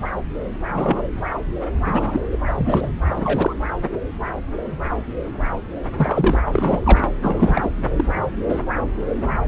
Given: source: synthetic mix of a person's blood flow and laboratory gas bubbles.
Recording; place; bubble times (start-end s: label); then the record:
Doppler ultrasound of blood flow; subclavian vein
0.67-1.02 s: bubbles
1.85-2.21 s: bubbles
2.31-2.38 s: bubbles
2.47-2.52 s: bubbles
2.57-2.91 s: bubbles
3.08-3.53 s: bubbles
5.96-6.41 s: bubbles
6.51-6.80 s: bubbles
6.84-7.03 s: bubbles
7.21-7.69 s: bubbles
7.96-8.04 s: bubbles
8.47-8.61 s: bubbles
From the record:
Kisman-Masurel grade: 232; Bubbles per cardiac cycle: several, 3 to 8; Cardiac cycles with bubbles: 50 to 99%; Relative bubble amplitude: moderate (0.250 to 0.450); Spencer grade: 3 (all of the cardiac periods contain showers or single bubble signals, but not dominating or overriding the cardiac motion signals); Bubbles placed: anywhere in the cardiac cycle